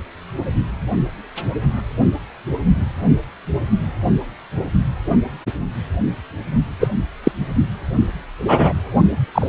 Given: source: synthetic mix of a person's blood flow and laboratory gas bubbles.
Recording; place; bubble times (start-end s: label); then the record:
Doppler ultrasound of blood flow; precordium
6.80-6.89 s: bubbles
7.24-7.32 s: bubbles
8.47-8.73 s: bubbles
9.34-9.47 s: bubbles
From the record:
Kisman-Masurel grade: 123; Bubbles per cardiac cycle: 1 to 2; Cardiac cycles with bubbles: 10 to 50%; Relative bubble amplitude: loud (0.450 to 0.775); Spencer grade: 2 (many but less than half of the cardiac periods contain bubble signals, singularly or in groups); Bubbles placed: only in the low amplitude regions of the cardiac cycle